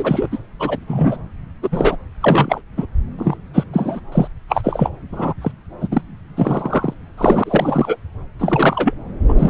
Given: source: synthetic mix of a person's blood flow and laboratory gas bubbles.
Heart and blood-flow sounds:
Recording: Doppler ultrasound of blood flow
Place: subclavian vein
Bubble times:
0.00-0.29 s: bubbles
0.32-0.38 s: bubbles
0.59-0.78 s: bubbles
0.86-1.17 s: bubbles
1.62-1.97 s: bubbles
2.21-2.61 s: bubbles
2.77-2.86 s: bubbles
3.18-3.35 s: bubbles
3.54-3.64 s: bubbles
3.73-4.00 s: bubbles
4.12-4.28 s: bubbles
4.49-4.90 s: bubbles
5.12-5.33 s: bubbles
5.41-5.52 s: bubbles
5.80-5.88 s: bubbles
5.92-6.02 s: bubbles
6.37-6.94 s: bubbles
7.17-7.96 s: bubbles
8.39-8.94 s: bubbles
9.28-9.50 s: bubbles
From the record:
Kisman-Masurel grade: 243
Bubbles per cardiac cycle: several, 3 to 8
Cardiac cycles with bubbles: 100%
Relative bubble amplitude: loud (0.450 to 0.775)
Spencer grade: 3 (all of the cardiac periods contain showers or single bubble signals, but not dominating or overriding the cardiac motion signals)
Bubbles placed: anywhere in the cardiac cycle

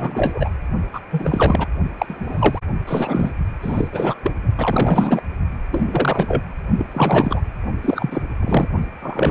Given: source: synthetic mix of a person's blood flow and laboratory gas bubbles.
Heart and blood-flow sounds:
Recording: Doppler ultrasound of blood flow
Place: precordium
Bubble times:
0.00-0.49 s: bubbles
0.92-1.00 s: bubbles
1.11-1.67 s: bubbles
1.98-2.59 s: bubbles
2.87-3.31 s: bubbles
3.61-3.88 s: bubbles
3.92-4.15 s: bubbles
4.24-4.33 s: bubbles
4.56-5.21 s: bubbles
5.71-6.43 s: bubbles
6.77-6.86 s: bubbles
6.94-7.42 s: bubbles
7.82-8.22 s: bubbles
8.41-8.68 s: bubbles
9.02-9.31 s: bubbles
From the record:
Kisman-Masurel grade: 343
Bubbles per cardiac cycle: rolling drumbeat, 9 or more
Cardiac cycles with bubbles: 100%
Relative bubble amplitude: loud (0.450 to 0.775)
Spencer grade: 3 (all of the cardiac periods contain showers or single bubble signals, but not dominating or overriding the cardiac motion signals)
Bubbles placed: only in the low amplitude regions of the cardiac cycle

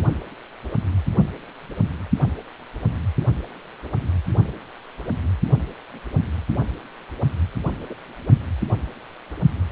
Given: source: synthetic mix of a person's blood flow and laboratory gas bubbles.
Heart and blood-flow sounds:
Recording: Doppler ultrasound of blood flow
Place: precordium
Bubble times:
7.90-7.94 s: bubbles
From the record:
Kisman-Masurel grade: 121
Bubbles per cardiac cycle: 1 to 2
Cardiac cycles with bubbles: 10 to 50%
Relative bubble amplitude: barely perceptible (0.100 to 0.250)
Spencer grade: 2 (many but less than half of the cardiac periods contain bubble signals, singularly or in groups)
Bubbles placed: only in the low amplitude regions of the cardiac cycle

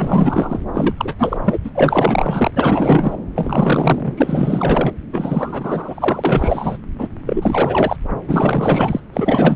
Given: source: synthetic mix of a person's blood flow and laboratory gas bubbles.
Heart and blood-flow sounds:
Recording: Doppler ultrasound of blood flow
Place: subclavian vein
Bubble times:
0.00-0.59 s: bubbles
0.73-0.94 s: bubbles
0.97-1.13 s: bubbles
1.19-1.59 s: bubbles
1.65-1.71 s: bubbles
1.75-2.51 s: bubbles
2.56-3.17 s: bubbles
3.35-4.93 s: bubbles
5.12-6.78 s: bubbles
6.99-7.08 s: bubbles
7.26-7.97 s: bubbles
8.28-9.00 s: bubbles
9.13-9.56 s: bubbles
From the record:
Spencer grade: 4 (maximum detectable bubble signal sounding continuously throughout systole and diastole of every cardiac period, and overriding the amplitude of the normal cardiac signals)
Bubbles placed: anywhere in the cardiac cycle

